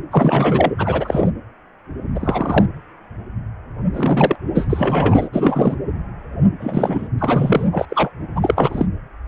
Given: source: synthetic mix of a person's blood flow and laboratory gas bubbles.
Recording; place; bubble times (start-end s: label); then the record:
Doppler ultrasound of blood flow; precordium
0.11-0.72 s: bubbles
0.77-1.31 s: bubbles
2.15-2.66 s: bubbles
3.94-4.36 s: bubbles
4.54-5.29 s: bubbles
5.32-5.76 s: bubbles
6.59-7.08 s: bubbles
7.18-7.69 s: bubbles
7.72-7.86 s: bubbles
7.89-8.09 s: bubbles
8.36-8.86 s: bubbles
From the record:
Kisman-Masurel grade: 223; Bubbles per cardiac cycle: several, 3 to 8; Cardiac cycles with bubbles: 10 to 50%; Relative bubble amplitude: loud (0.450 to 0.775); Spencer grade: 2 (many but less than half of the cardiac periods contain bubble signals, singularly or in groups); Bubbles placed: anywhere in the cardiac cycle